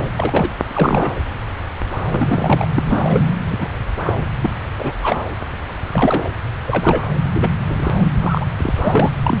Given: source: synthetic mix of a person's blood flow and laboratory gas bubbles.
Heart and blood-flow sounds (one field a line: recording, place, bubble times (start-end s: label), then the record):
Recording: Doppler ultrasound of blood flow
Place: subclavian vein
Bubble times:
0.17-0.49 s: bubbles
0.73-1.11 s: bubbles
2.11-2.67 s: bubbles
2.76-3.34 s: bubbles
3.50-3.70 s: bubbles
4.05-4.13 s: bubbles
4.42-4.50 s: bubbles
4.79-4.92 s: bubbles
5.03-5.24 s: bubbles
5.69-5.73 s: bubbles
5.90-6.30 s: bubbles
6.65-7.03 s: bubbles
7.33-7.51 s: bubbles
7.69-7.90 s: bubbles
8.21-8.46 s: bubbles
8.57-8.72 s: bubbles
8.76-9.11 s: bubbles
9.23-9.38 s: bubbles
From the record:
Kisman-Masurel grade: 233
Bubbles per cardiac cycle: several, 3 to 8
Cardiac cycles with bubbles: 50 to 99%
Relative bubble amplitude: loud (0.450 to 0.775)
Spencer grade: 3 (all of the cardiac periods contain showers or single bubble signals, but not dominating or overriding the cardiac motion signals)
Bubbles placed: anywhere in the cardiac cycle